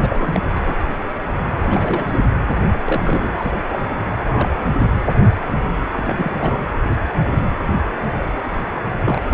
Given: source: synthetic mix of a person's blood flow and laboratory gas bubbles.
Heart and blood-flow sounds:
Doppler ultrasound of blood flow; precordium
0.01-0.40 s: bubbles
0.55-0.75 s: bubbles
1.63-2.29 s: bubbles
2.84-3.51 s: bubbles
3.69-3.79 s: bubbles
3.99-4.04 s: bubbles
4.13-4.58 s: bubbles
5.92-6.32 s: bubbles
6.39-6.69 s: bubbles
9.04-9.21 s: bubbles
9.30-9.34 s: bubbles
From the record:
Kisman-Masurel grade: 332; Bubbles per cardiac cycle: rolling drumbeat, 9 or more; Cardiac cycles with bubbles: 50 to 99%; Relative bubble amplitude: moderate (0.250 to 0.450); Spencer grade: 3 (all of the cardiac periods contain showers or single bubble signals, but not dominating or overriding the cardiac motion signals); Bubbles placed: anywhere in the cardiac cycle

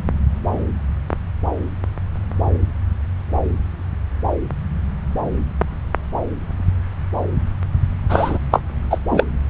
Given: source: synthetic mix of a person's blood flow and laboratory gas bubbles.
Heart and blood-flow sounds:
Doppler ultrasound of blood flow; subclavian vein
8.09-8.38 s: bubbles
8.52-8.61 s: bubbles
8.90-8.98 s: bubbles
9.11-9.24 s: bubbles
From the record:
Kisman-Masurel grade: 213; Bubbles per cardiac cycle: several, 3 to 8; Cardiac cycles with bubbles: 1 to 10%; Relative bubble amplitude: loud (0.450 to 0.775); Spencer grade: 1 (occasional bubble signal discernible with the cardiac motion signal, with majority of cardiac periods free of bubbles); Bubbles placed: anywhere in the cardiac cycle

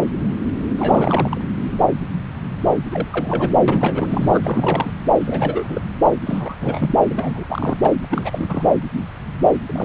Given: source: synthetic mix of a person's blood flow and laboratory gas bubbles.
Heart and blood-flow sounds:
Doppler ultrasound of blood flow; subclavian vein
0.78-1.41 s: bubbles
2.90-3.53 s: bubbles
3.68-4.92 s: bubbles
5.19-5.81 s: bubbles
6.25-6.56 s: bubbles
6.60-6.96 s: bubbles
7.09-7.44 s: bubbles
7.49-7.77 s: bubbles
7.81-7.93 s: bubbles
8.04-8.68 s: bubbles
9.66-9.85 s: bubbles
From the record:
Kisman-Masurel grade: 332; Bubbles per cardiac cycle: rolling drumbeat, 9 or more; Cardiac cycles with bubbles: 50 to 99%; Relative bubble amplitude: moderate (0.250 to 0.450); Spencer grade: 3 (all of the cardiac periods contain showers or single bubble signals, but not dominating or overriding the cardiac motion signals); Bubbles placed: anywhere in the cardiac cycle

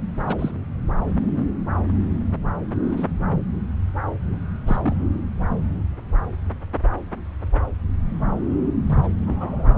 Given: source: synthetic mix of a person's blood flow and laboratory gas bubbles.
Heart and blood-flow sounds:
Doppler ultrasound of blood flow; subclavian vein
0.25-0.35 s: bubbles
0.39-0.51 s: bubbles
2.91-3.06 s: bubbles
4.67-4.96 s: bubbles
8.86-9.13 s: bubbles
9.27-9.77 s: bubbles
From the record:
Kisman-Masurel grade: 121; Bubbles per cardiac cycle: 1 to 2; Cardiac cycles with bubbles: 10 to 50%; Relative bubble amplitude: barely perceptible (0.100 to 0.250); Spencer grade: 2 (many but less than half of the cardiac periods contain bubble signals, singularly or in groups); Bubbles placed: anywhere in the cardiac cycle

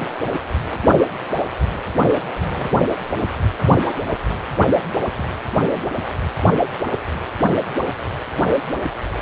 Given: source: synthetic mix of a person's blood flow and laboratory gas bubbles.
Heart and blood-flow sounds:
Doppler ultrasound of blood flow; precordium
0.00-0.09 s: bubbles
0.67-0.87 s: bubbles
1.73-1.92 s: bubbles
2.09-2.71 s: bubbles
5.18-5.27 s: bubbles
5.75-5.83 s: bubbles
9.03-9.14 s: bubbles
From the record:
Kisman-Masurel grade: 221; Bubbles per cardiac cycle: several, 3 to 8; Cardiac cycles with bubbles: 10 to 50%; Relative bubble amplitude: barely perceptible (0.100 to 0.250); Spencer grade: 2 (many but less than half of the cardiac periods contain bubble signals, singularly or in groups); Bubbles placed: anywhere in the cardiac cycle

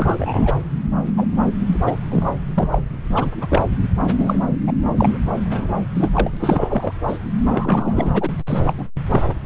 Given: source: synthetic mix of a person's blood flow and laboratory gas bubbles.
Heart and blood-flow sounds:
Doppler ultrasound of blood flow; subclavian vein
0.00-0.57 s: bubbles
1.17-1.26 s: bubbles
1.67-1.80 s: bubbles
1.86-1.96 s: bubbles
2.10-2.35 s: bubbles
2.54-2.69 s: bubbles
2.72-2.81 s: bubbles
3.10-3.30 s: bubbles
3.41-3.47 s: bubbles
3.50-3.69 s: bubbles
4.11-4.47 s: bubbles
4.67-4.72 s: bubbles
4.97-5.18 s: bubbles
5.45-5.74 s: bubbles
5.94-6.11 s: bubbles
6.14-6.29 s: bubbles
6.33-6.37 s: bubbles
6.39-6.93 s: bubbles
7.07-7.19 s: bubbles
7.47-8.30 s: bubbles
8.47-8.63 s: bubbles
8.67-8.74 s: bubbles
8.77-8.84 s: bubbles
9.09-9.22 s: bubbles
From the record:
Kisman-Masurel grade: 242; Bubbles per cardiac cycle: several, 3 to 8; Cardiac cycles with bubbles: 100%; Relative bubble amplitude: moderate (0.250 to 0.450); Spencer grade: 3 (all of the cardiac periods contain showers or single bubble signals, but not dominating or overriding the cardiac motion signals); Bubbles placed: anywhere in the cardiac cycle

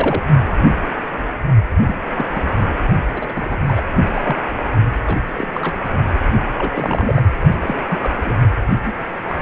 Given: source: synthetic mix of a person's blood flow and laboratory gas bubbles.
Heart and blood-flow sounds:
Doppler ultrasound of blood flow; precordium
0.00-0.24 s: bubbles
1.84-2.01 s: bubbles
2.15-2.25 s: bubbles
2.30-2.46 s: bubbles
3.14-3.57 s: bubbles
3.67-3.82 s: bubbles
4.14-4.36 s: bubbles
5.06-5.20 s: bubbles
5.26-5.46 s: bubbles
5.52-5.81 s: bubbles
6.58-7.22 s: bubbles
7.60-7.75 s: bubbles
7.91-8.17 s: bubbles
8.25-8.41 s: bubbles
8.85-8.93 s: bubbles
9.28-9.42 s: bubbles
From the record:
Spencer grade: 3 (all of the cardiac periods contain showers or single bubble signals, but not dominating or overriding the cardiac motion signals); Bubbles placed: only in the low amplitude regions of the cardiac cycle

